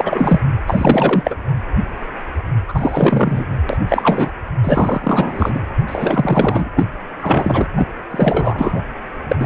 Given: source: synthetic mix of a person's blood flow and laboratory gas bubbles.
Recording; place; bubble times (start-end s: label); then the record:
Doppler ultrasound of blood flow; precordium
0.00-0.40 s: bubbles
0.67-1.35 s: bubbles
2.68-3.46 s: bubbles
3.69-3.77 s: bubbles
3.89-4.32 s: bubbles
4.63-5.60 s: bubbles
5.87-6.68 s: bubbles
6.76-6.84 s: bubbles
7.21-7.67 s: bubbles
7.76-7.88 s: bubbles
8.11-8.83 s: bubbles
9.29-9.37 s: bubbles
9.39-9.46 s: bubbles
From the record:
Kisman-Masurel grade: 333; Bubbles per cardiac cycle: rolling drumbeat, 9 or more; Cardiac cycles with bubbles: 50 to 99%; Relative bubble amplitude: loud (0.450 to 0.775); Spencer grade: 3 (all of the cardiac periods contain showers or single bubble signals, but not dominating or overriding the cardiac motion signals); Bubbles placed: anywhere in the cardiac cycle